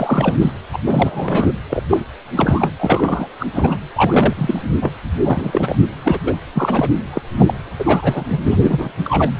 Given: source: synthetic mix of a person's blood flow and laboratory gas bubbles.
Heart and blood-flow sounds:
Doppler ultrasound of blood flow; precordium
0.00-0.52 s: bubbles
0.73-0.78 s: bubbles
0.85-1.53 s: bubbles
1.70-1.83 s: bubbles
1.89-2.00 s: bubbles
2.35-2.72 s: bubbles
2.79-3.28 s: bubbles
3.39-3.46 s: bubbles
3.54-3.77 s: bubbles
3.96-4.62 s: bubbles
4.81-4.92 s: bubbles
5.23-5.75 s: bubbles
6.04-6.19 s: bubbles
6.25-6.34 s: bubbles
6.54-6.91 s: bubbles
7.12-7.21 s: bubbles
7.38-7.54 s: bubbles
7.79-8.24 s: bubbles
8.31-8.38 s: bubbles
8.45-8.92 s: bubbles
8.97-9.31 s: bubbles
From the record:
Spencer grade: 3 (all of the cardiac periods contain showers or single bubble signals, but not dominating or overriding the cardiac motion signals); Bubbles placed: anywhere in the cardiac cycle

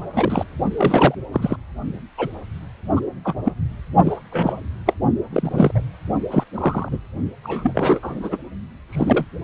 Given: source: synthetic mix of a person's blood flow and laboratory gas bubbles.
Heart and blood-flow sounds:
Doppler ultrasound of blood flow; precordium
0.14-0.46 s: bubbles
0.77-1.15 s: bubbles
1.32-1.56 s: bubbles
2.17-2.28 s: bubbles
2.96-3.00 s: bubbles
3.24-3.34 s: bubbles
3.44-3.52 s: bubbles
4.04-4.16 s: bubbles
4.31-4.68 s: bubbles
4.85-4.94 s: bubbles
5.33-5.71 s: bubbles
5.74-5.81 s: bubbles
6.30-6.44 s: bubbles
6.54-6.88 s: bubbles
6.91-6.98 s: bubbles
7.44-8.38 s: bubbles
8.89-9.25 s: bubbles
From the record:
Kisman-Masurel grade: 242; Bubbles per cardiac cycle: several, 3 to 8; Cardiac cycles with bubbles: 100%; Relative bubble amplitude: moderate (0.250 to 0.450); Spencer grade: 3 (all of the cardiac periods contain showers or single bubble signals, but not dominating or overriding the cardiac motion signals); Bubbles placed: only in the low amplitude regions of the cardiac cycle

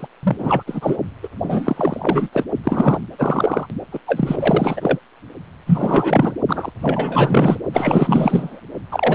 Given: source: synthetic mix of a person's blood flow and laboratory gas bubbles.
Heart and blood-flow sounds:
Doppler ultrasound of blood flow; precordium
0.00-0.07 s: bubbles
0.23-0.63 s: bubbles
0.67-0.97 s: bubbles
1.23-1.28 s: bubbles
1.43-2.29 s: bubbles
2.33-2.44 s: bubbles
2.63-3.00 s: bubbles
3.18-3.67 s: bubbles
3.92-4.00 s: bubbles
4.07-4.99 s: bubbles
5.66-6.33 s: bubbles
6.48-6.71 s: bubbles
6.79-7.58 s: bubbles
7.73-8.60 s: bubbles
8.91-9.14 s: bubbles
From the record:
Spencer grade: 4 (maximum detectable bubble signal sounding continuously throughout systole and diastole of every cardiac period, and overriding the amplitude of the normal cardiac signals); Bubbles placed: only in the low amplitude regions of the cardiac cycle

